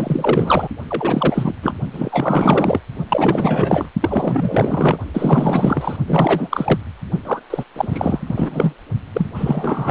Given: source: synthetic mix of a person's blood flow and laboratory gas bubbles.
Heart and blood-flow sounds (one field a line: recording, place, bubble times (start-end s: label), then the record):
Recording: Doppler ultrasound of blood flow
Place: precordium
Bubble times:
0.00-0.67 s: bubbles
0.88-1.55 s: bubbles
1.62-1.73 s: bubbles
1.93-2.80 s: bubbles
3.08-3.89 s: bubbles
4.01-4.99 s: bubbles
5.14-5.97 s: bubbles
6.07-6.79 s: bubbles
7.25-7.40 s: bubbles
7.50-7.64 s: bubbles
7.76-8.73 s: bubbles
9.13-9.27 s: bubbles
9.34-9.91 s: bubbles
From the record:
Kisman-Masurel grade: 444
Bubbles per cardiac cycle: continuous sound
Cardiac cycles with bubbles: 100%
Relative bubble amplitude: maximal (0.775 to 0.999)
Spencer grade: 4 (maximum detectable bubble signal sounding continuously throughout systole and diastole of every cardiac period, and overriding the amplitude of the normal cardiac signals)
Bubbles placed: only in the low amplitude regions of the cardiac cycle